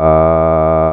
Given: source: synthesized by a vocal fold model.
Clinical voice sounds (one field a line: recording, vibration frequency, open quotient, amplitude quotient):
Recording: sustained vowel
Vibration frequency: 80 Hz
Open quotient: 0.4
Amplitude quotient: 1.2